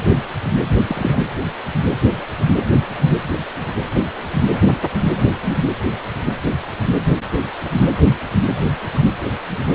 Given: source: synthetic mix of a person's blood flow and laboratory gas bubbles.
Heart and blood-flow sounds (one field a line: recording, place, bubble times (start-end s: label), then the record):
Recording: Doppler ultrasound of blood flow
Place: precordium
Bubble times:
0.87-1.21 s: bubbles
5.45-5.58 s: bubbles
From the record:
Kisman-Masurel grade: 122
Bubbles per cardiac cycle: 1 to 2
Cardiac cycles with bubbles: 10 to 50%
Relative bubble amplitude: moderate (0.250 to 0.450)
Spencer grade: 2 (many but less than half of the cardiac periods contain bubble signals, singularly or in groups)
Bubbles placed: anywhere in the cardiac cycle